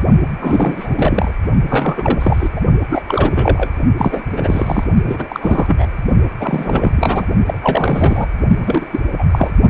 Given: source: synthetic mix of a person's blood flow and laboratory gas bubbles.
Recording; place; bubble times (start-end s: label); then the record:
Doppler ultrasound of blood flow; precordium
0.00-0.02 s: bubbles
0.39-1.33 s: bubbles
1.69-2.49 s: bubbles
2.56-2.60 s: bubbles
2.89-3.02 s: bubbles
3.08-3.69 s: bubbles
3.97-4.25 s: bubbles
4.31-4.84 s: bubbles
5.05-5.86 s: bubbles
6.40-6.92 s: bubbles
6.96-7.26 s: bubbles
7.47-7.59 s: bubbles
7.62-8.26 s: bubbles
8.62-8.87 s: bubbles
8.92-9.00 s: bubbles
9.18-9.24 s: bubbles
9.32-9.51 s: bubbles
From the record:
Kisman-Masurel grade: 343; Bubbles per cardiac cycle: rolling drumbeat, 9 or more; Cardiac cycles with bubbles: 100%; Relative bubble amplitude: loud (0.450 to 0.775); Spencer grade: 3 (all of the cardiac periods contain showers or single bubble signals, but not dominating or overriding the cardiac motion signals); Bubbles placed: only in the low amplitude regions of the cardiac cycle